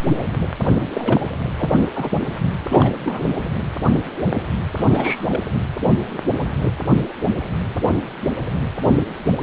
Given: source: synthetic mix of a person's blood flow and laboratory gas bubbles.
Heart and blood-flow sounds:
Doppler ultrasound of blood flow; precordium
0.95-1.21 s: bubbles
1.57-1.70 s: bubbles
1.93-2.27 s: bubbles
2.70-2.95 s: bubbles
3.04-3.30 s: bubbles
4.76-5.42 s: bubbles
From the record:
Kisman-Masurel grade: 222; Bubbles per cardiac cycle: several, 3 to 8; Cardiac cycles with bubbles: 10 to 50%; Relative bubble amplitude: moderate (0.250 to 0.450); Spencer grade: 2 (many but less than half of the cardiac periods contain bubble signals, singularly or in groups); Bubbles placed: anywhere in the cardiac cycle

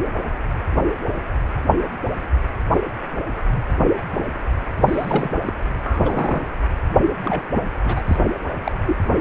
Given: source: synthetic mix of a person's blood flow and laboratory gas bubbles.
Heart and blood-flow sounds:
Doppler ultrasound of blood flow; precordium
4.88-5.29 s: bubbles
5.46-5.53 s: bubbles
5.83-6.00 s: bubbles
6.03-6.47 s: bubbles
7.24-7.42 s: bubbles
7.52-7.62 s: bubbles
7.83-8.02 s: bubbles
8.06-8.16 s: bubbles
8.64-8.72 s: bubbles
8.85-9.01 s: bubbles
From the record:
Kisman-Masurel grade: 222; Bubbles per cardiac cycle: several, 3 to 8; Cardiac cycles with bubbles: 10 to 50%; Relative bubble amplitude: moderate (0.250 to 0.450); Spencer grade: 2 (many but less than half of the cardiac periods contain bubble signals, singularly or in groups); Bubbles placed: anywhere in the cardiac cycle

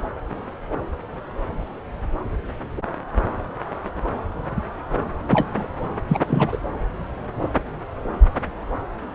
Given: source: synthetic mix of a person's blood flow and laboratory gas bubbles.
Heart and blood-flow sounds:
Doppler ultrasound of blood flow; subclavian vein
5.28-5.48 s: bubbles
5.55-5.68 s: bubbles
6.08-6.19 s: bubbles
6.27-6.58 s: bubbles
From the record:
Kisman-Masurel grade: 212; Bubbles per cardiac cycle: several, 3 to 8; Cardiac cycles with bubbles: 1 to 10%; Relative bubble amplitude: moderate (0.250 to 0.450); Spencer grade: 1 (occasional bubble signal discernible with the cardiac motion signal, with majority of cardiac periods free of bubbles); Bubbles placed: anywhere in the cardiac cycle

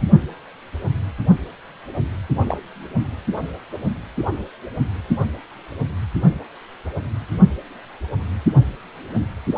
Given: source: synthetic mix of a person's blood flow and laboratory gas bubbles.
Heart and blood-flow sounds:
Doppler ultrasound of blood flow; precordium
2.45-2.58 s: bubbles
From the record:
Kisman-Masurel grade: 112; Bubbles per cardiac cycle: 1 to 2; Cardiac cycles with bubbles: 1 to 10%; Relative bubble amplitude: moderate (0.250 to 0.450); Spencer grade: 1 (occasional bubble signal discernible with the cardiac motion signal, with majority of cardiac periods free of bubbles); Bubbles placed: anywhere in the cardiac cycle

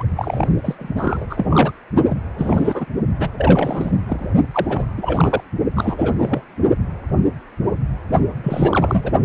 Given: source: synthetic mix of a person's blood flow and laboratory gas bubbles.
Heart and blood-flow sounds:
Doppler ultrasound of blood flow; precordium
0.00-0.04 s: bubbles
0.16-0.75 s: bubbles
0.78-1.26 s: bubbles
1.29-1.72 s: bubbles
2.06-2.18 s: bubbles
2.33-2.86 s: bubbles
3.19-3.29 s: bubbles
3.38-3.91 s: bubbles
4.06-4.25 s: bubbles
4.51-4.92 s: bubbles
4.97-5.44 s: bubbles
5.75-6.16 s: bubbles
6.19-6.42 s: bubbles
8.43-9.12 s: bubbles
From the record:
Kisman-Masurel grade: 332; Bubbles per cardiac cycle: rolling drumbeat, 9 or more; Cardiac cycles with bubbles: 50 to 99%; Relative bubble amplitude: moderate (0.250 to 0.450); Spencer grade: 3 (all of the cardiac periods contain showers or single bubble signals, but not dominating or overriding the cardiac motion signals); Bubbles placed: only in the low amplitude regions of the cardiac cycle

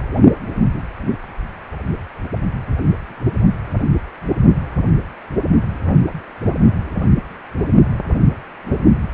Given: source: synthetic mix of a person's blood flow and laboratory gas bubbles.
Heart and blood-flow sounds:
Doppler ultrasound of blood flow; precordium
no bubbles
From the record:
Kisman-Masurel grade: 000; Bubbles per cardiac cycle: 0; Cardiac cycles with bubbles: 0%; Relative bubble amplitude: no bubbles discernible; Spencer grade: 0 (complete lack of bubble signals)

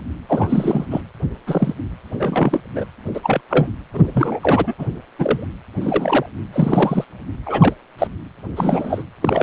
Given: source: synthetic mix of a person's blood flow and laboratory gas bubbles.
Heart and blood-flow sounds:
Doppler ultrasound of blood flow; precordium
0.29-0.85 s: bubbles
0.90-1.01 s: bubbles
1.47-1.74 s: bubbles
2.06-2.60 s: bubbles
2.75-2.85 s: bubbles
3.14-3.20 s: bubbles
3.23-3.41 s: bubbles
3.50-3.69 s: bubbles
3.93-4.75 s: bubbles
4.78-4.86 s: bubbles
5.18-5.48 s: bubbles
5.80-6.26 s: bubbles
6.52-7.04 s: bubbles
7.46-7.75 s: bubbles
7.98-8.07 s: bubbles
8.56-9.03 s: bubbles
9.21-9.43 s: bubbles
From the record:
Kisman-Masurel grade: 243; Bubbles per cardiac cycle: several, 3 to 8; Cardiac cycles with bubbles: 100%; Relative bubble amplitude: loud (0.450 to 0.775); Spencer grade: 3 (all of the cardiac periods contain showers or single bubble signals, but not dominating or overriding the cardiac motion signals); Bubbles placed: anywhere in the cardiac cycle

